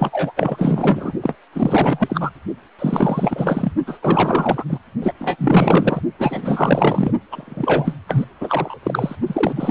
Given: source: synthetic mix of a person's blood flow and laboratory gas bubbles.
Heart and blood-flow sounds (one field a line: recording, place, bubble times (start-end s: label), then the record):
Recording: Doppler ultrasound of blood flow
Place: precordium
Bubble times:
0.00-0.32 s: bubbles
0.36-1.13 s: bubbles
1.21-1.36 s: bubbles
1.52-2.30 s: bubbles
2.79-3.72 s: bubbles
3.86-3.99 s: bubbles
4.02-4.64 s: bubbles
4.69-4.79 s: bubbles
5.02-5.12 s: bubbles
5.19-5.35 s: bubbles
5.38-6.01 s: bubbles
6.18-7.12 s: bubbles
7.32-7.95 s: bubbles
8.07-8.25 s: bubbles
8.41-8.79 s: bubbles
8.83-9.16 s: bubbles
9.27-9.71 s: bubbles
From the record:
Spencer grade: 4 (maximum detectable bubble signal sounding continuously throughout systole and diastole of every cardiac period, and overriding the amplitude of the normal cardiac signals)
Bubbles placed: only in the low amplitude regions of the cardiac cycle